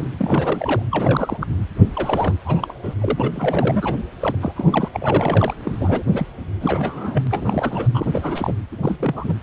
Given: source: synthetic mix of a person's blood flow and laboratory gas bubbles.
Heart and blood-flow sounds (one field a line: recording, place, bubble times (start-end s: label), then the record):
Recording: Doppler ultrasound of blood flow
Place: precordium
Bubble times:
0.00-0.07 s: bubbles
0.18-0.82 s: bubbles
0.91-1.47 s: bubbles
1.95-2.34 s: bubbles
2.45-2.79 s: bubbles
2.83-2.95 s: bubbles
3.00-3.94 s: bubbles
4.20-4.35 s: bubbles
4.40-4.52 s: bubbles
4.56-4.88 s: bubbles
4.93-5.54 s: bubbles
5.63-6.02 s: bubbles
6.11-6.26 s: bubbles
6.60-7.22 s: bubbles
7.25-7.27 s: bubbles
7.30-7.88 s: bubbles
7.94-8.07 s: bubbles
8.12-8.54 s: bubbles
8.71-8.77 s: bubbles
8.82-9.36 s: bubbles
From the record:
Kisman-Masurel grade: 332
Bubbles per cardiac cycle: rolling drumbeat, 9 or more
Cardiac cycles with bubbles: 50 to 99%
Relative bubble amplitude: moderate (0.250 to 0.450)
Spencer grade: 3 (all of the cardiac periods contain showers or single bubble signals, but not dominating or overriding the cardiac motion signals)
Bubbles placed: anywhere in the cardiac cycle